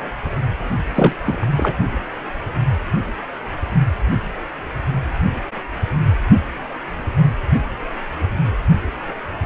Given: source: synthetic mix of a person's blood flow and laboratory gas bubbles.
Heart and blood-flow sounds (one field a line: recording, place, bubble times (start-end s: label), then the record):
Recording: Doppler ultrasound of blood flow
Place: precordium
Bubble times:
0.94-1.17 s: bubbles
1.25-1.48 s: bubbles
1.56-1.72 s: bubbles
From the record:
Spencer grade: 1 (occasional bubble signal discernible with the cardiac motion signal, with majority of cardiac periods free of bubbles)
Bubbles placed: only in the low amplitude regions of the cardiac cycle